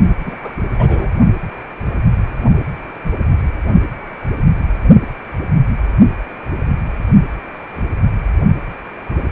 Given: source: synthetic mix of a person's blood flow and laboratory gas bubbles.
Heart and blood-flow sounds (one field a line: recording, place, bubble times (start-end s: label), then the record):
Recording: Doppler ultrasound of blood flow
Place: precordium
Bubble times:
0.25-0.36 s: bubbles
0.42-0.53 s: bubbles
0.79-1.11 s: bubbles
From the record:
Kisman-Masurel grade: 212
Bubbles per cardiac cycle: several, 3 to 8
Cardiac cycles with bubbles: 1 to 10%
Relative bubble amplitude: moderate (0.250 to 0.450)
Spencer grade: 1 (occasional bubble signal discernible with the cardiac motion signal, with majority of cardiac periods free of bubbles)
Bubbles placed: only in the low amplitude regions of the cardiac cycle